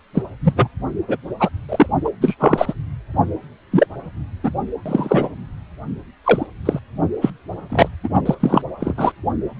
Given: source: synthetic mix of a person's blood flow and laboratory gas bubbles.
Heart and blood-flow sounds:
Doppler ultrasound of blood flow; precordium
0.14-0.23 s: bubbles
0.44-0.70 s: bubbles
1.07-1.16 s: bubbles
1.40-1.49 s: bubbles
1.68-1.86 s: bubbles
2.04-2.10 s: bubbles
2.21-2.35 s: bubbles
2.40-2.73 s: bubbles
3.71-3.86 s: bubbles
4.43-4.52 s: bubbles
4.86-5.33 s: bubbles
6.24-6.46 s: bubbles
6.65-6.79 s: bubbles
7.21-7.30 s: bubbles
7.70-7.89 s: bubbles
8.03-8.09 s: bubbles
8.26-8.35 s: bubbles
8.39-8.62 s: bubbles
8.80-8.94 s: bubbles
8.97-9.12 s: bubbles
From the record:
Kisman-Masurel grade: 243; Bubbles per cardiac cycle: several, 3 to 8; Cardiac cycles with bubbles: 100%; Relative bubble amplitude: loud (0.450 to 0.775); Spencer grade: 3 (all of the cardiac periods contain showers or single bubble signals, but not dominating or overriding the cardiac motion signals); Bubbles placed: only in the low amplitude regions of the cardiac cycle

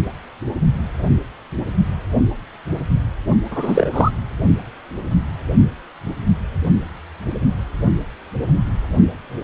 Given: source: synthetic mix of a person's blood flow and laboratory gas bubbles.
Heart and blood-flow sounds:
Doppler ultrasound of blood flow; precordium
3.50-4.11 s: bubbles
From the record:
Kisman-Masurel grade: 213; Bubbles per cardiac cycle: several, 3 to 8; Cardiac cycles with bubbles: 1 to 10%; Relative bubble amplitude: loud (0.450 to 0.775); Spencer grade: 1 (occasional bubble signal discernible with the cardiac motion signal, with majority of cardiac periods free of bubbles); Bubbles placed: only in the low amplitude regions of the cardiac cycle

